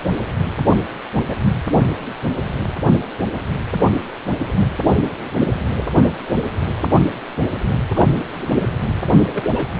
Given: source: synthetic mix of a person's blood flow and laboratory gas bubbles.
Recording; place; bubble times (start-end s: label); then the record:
Doppler ultrasound of blood flow; precordium
1.20-1.34 s: bubbles
4.58-4.65 s: bubbles
6.60-6.71 s: bubbles
7.95-8.10 s: bubbles
8.15-8.25 s: bubbles
9.33-9.44 s: bubbles
9.54-9.66 s: bubbles
From the record:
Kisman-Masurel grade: 122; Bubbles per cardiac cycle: 1 to 2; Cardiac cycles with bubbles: 10 to 50%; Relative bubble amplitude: moderate (0.250 to 0.450); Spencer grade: 2 (many but less than half of the cardiac periods contain bubble signals, singularly or in groups); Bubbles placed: anywhere in the cardiac cycle